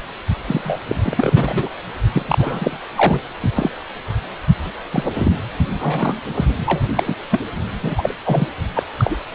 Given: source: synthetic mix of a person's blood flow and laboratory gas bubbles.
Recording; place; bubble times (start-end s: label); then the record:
Doppler ultrasound of blood flow; precordium
0.46-0.61 s: bubbles
0.63-0.80 s: bubbles
0.89-1.02 s: bubbles
1.04-1.69 s: bubbles
2.12-2.23 s: bubbles
2.27-2.79 s: bubbles
2.96-3.21 s: bubbles
3.43-3.72 s: bubbles
4.65-4.71 s: bubbles
4.92-5.03 s: bubbles
5.18-5.32 s: bubbles
5.79-6.21 s: bubbles
6.34-6.46 s: bubbles
6.67-6.82 s: bubbles
6.95-7.14 s: bubbles
7.31-7.40 s: bubbles
7.82-8.14 s: bubbles
8.24-8.46 s: bubbles
8.76-8.83 s: bubbles
8.98-9.16 s: bubbles
From the record:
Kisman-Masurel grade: 242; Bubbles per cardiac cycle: several, 3 to 8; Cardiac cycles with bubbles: 100%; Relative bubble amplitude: moderate (0.250 to 0.450); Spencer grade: 3 (all of the cardiac periods contain showers or single bubble signals, but not dominating or overriding the cardiac motion signals); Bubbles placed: anywhere in the cardiac cycle